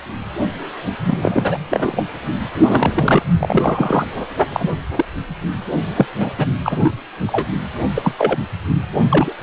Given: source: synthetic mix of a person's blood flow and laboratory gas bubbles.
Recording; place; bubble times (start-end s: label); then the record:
Doppler ultrasound of blood flow; precordium
1.04-1.19 s: bubbles
1.21-1.58 s: bubbles
1.70-2.03 s: bubbles
2.63-3.22 s: bubbles
3.40-4.06 s: bubbles
4.53-4.70 s: bubbles
4.96-5.05 s: bubbles
5.96-6.07 s: bubbles
6.20-6.33 s: bubbles
6.38-6.47 s: bubbles
6.64-6.93 s: bubbles
7.27-7.45 s: bubbles
7.95-8.37 s: bubbles
9.09-9.32 s: bubbles
From the record:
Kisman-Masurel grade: 243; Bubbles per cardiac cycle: several, 3 to 8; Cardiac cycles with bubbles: 100%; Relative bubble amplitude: loud (0.450 to 0.775); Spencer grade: 3 (all of the cardiac periods contain showers or single bubble signals, but not dominating or overriding the cardiac motion signals); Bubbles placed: anywhere in the cardiac cycle